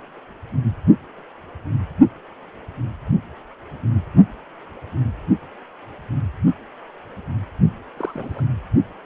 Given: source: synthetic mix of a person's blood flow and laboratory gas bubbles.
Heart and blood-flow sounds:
Doppler ultrasound of blood flow; precordium
7.97-8.45 s: bubbles
From the record:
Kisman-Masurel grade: 111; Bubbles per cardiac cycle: 1 to 2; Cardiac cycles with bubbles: 1 to 10%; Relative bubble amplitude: barely perceptible (0.100 to 0.250); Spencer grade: 1 (occasional bubble signal discernible with the cardiac motion signal, with majority of cardiac periods free of bubbles); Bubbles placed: only in the low amplitude regions of the cardiac cycle

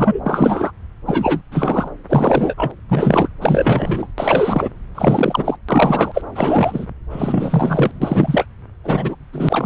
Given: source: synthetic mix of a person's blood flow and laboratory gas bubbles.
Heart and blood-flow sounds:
Doppler ultrasound of blood flow; subclavian vein
0.00-0.20 s: bubbles
0.25-0.71 s: bubbles
1.06-1.42 s: bubbles
1.51-1.88 s: bubbles
2.09-2.54 s: bubbles
2.57-2.72 s: bubbles
2.89-3.29 s: bubbles
3.41-4.07 s: bubbles
4.18-4.69 s: bubbles
4.95-5.56 s: bubbles
5.69-6.22 s: bubbles
6.35-6.87 s: bubbles
7.10-7.92 s: bubbles
8.02-8.45 s: bubbles
8.84-9.15 s: bubbles
9.32-9.66 s: bubbles
From the record:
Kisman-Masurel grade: 343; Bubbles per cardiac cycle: rolling drumbeat, 9 or more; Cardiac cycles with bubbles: 100%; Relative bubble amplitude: loud (0.450 to 0.775); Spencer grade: 3 (all of the cardiac periods contain showers or single bubble signals, but not dominating or overriding the cardiac motion signals); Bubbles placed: anywhere in the cardiac cycle

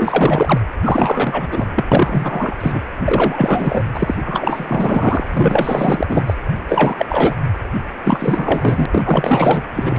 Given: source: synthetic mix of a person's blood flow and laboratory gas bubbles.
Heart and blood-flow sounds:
Doppler ultrasound of blood flow; precordium
0.00-0.61 s: bubbles
0.83-1.70 s: bubbles
1.75-1.84 s: bubbles
1.92-2.55 s: bubbles
2.60-2.81 s: bubbles
3.04-3.84 s: bubbles
3.94-4.15 s: bubbles
4.24-5.27 s: bubbles
5.30-6.24 s: bubbles
6.27-6.34 s: bubbles
6.69-7.06 s: bubbles
7.08-7.35 s: bubbles
8.04-8.86 s: bubbles
8.92-9.62 s: bubbles
9.73-9.99 s: bubbles
From the record:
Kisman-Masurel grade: 444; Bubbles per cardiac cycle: continuous sound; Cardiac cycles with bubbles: 100%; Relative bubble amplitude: maximal (0.775 to 0.999); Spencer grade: 4 (maximum detectable bubble signal sounding continuously throughout systole and diastole of every cardiac period, and overriding the amplitude of the normal cardiac signals); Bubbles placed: anywhere in the cardiac cycle

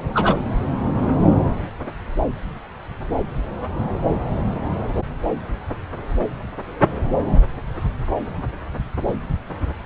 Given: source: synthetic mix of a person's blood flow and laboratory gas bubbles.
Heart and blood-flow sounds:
Doppler ultrasound of blood flow; subclavian vein
0.14-0.36 s: bubbles
From the record:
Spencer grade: 1 (occasional bubble signal discernible with the cardiac motion signal, with majority of cardiac periods free of bubbles); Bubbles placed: anywhere in the cardiac cycle

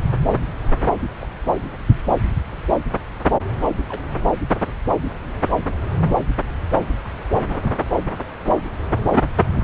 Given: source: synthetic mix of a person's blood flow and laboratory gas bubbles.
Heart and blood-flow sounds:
Doppler ultrasound of blood flow; subclavian vein
1.20-1.29 s: bubbles
3.88-4.00 s: bubbles
7.04-7.08 s: bubbles
8.85-9.02 s: bubbles
9.59-9.63 s: bubbles
From the record:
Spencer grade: 2 (many but less than half of the cardiac periods contain bubble signals, singularly or in groups); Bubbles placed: anywhere in the cardiac cycle

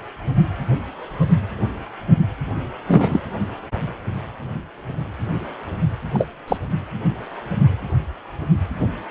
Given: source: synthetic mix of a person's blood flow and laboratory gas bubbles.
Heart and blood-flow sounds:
Doppler ultrasound of blood flow; precordium
2.88-3.22 s: bubbles
6.13-6.27 s: bubbles
6.47-6.58 s: bubbles
From the record:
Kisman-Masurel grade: 123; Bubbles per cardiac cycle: 1 to 2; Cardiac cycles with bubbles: 10 to 50%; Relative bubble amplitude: loud (0.450 to 0.775); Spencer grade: 2 (many but less than half of the cardiac periods contain bubble signals, singularly or in groups); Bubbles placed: anywhere in the cardiac cycle

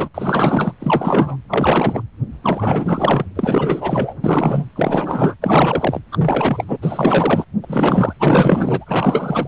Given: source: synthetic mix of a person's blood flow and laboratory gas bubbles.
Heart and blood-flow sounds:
Doppler ultrasound of blood flow; precordium
0.00-0.09 s: bubbles
0.14-0.72 s: bubbles
0.80-1.36 s: bubbles
1.48-2.03 s: bubbles
2.43-3.26 s: bubbles
3.35-4.16 s: bubbles
4.24-4.65 s: bubbles
4.75-5.35 s: bubbles
5.41-5.99 s: bubbles
6.12-6.77 s: bubbles
6.82-7.45 s: bubbles
7.62-8.14 s: bubbles
8.19-9.47 s: bubbles
From the record:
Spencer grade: 4 (maximum detectable bubble signal sounding continuously throughout systole and diastole of every cardiac period, and overriding the amplitude of the normal cardiac signals); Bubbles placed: anywhere in the cardiac cycle

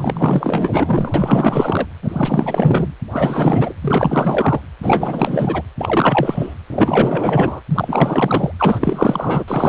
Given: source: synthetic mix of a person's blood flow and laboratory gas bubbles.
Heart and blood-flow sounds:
Doppler ultrasound of blood flow; precordium
0.00-1.86 s: bubbles
2.02-2.95 s: bubbles
3.12-3.74 s: bubbles
3.81-4.60 s: bubbles
4.82-5.62 s: bubbles
5.79-6.54 s: bubbles
6.70-7.61 s: bubbles
7.71-8.53 s: bubbles
8.58-9.44 s: bubbles
9.47-9.68 s: bubbles
From the record:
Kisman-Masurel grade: 444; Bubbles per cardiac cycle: continuous sound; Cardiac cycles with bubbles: 100%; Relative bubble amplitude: maximal (0.775 to 0.999); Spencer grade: 4 (maximum detectable bubble signal sounding continuously throughout systole and diastole of every cardiac period, and overriding the amplitude of the normal cardiac signals); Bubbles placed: anywhere in the cardiac cycle

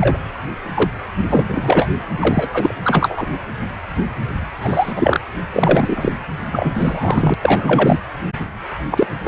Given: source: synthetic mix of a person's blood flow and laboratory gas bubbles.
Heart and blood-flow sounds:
Doppler ultrasound of blood flow; precordium
0.01-0.18 s: bubbles
0.74-0.91 s: bubbles
1.27-1.43 s: bubbles
1.54-1.89 s: bubbles
2.19-2.73 s: bubbles
2.84-3.27 s: bubbles
4.61-4.93 s: bubbles
4.96-5.20 s: bubbles
5.53-6.12 s: bubbles
6.52-7.34 s: bubbles
7.41-8.00 s: bubbles
8.91-9.06 s: bubbles
9.24-9.28 s: bubbles
From the record:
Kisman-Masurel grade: 233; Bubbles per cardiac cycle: several, 3 to 8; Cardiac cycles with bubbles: 50 to 99%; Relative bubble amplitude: loud (0.450 to 0.775); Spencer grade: 3 (all of the cardiac periods contain showers or single bubble signals, but not dominating or overriding the cardiac motion signals); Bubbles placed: anywhere in the cardiac cycle

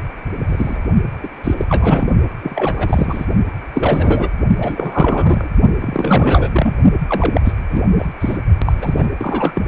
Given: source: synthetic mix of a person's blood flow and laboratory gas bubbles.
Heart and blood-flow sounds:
Doppler ultrasound of blood flow; precordium
0.49-0.77 s: bubbles
1.24-1.28 s: bubbles
1.44-1.55 s: bubbles
1.57-1.65 s: bubbles
1.69-2.09 s: bubbles
2.43-3.25 s: bubbles
3.73-4.29 s: bubbles
4.57-5.49 s: bubbles
5.80-6.49 s: bubbles
6.52-6.76 s: bubbles
7.08-7.41 s: bubbles
7.44-7.52 s: bubbles
7.70-7.82 s: bubbles
7.98-8.09 s: bubbles
8.21-8.37 s: bubbles
8.65-8.72 s: bubbles
8.77-9.09 s: bubbles
9.17-9.52 s: bubbles
9.54-9.62 s: bubbles
From the record:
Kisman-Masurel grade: 343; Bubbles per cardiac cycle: rolling drumbeat, 9 or more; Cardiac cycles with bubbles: 100%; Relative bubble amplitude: loud (0.450 to 0.775); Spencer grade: 3 (all of the cardiac periods contain showers or single bubble signals, but not dominating or overriding the cardiac motion signals); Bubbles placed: only in the low amplitude regions of the cardiac cycle

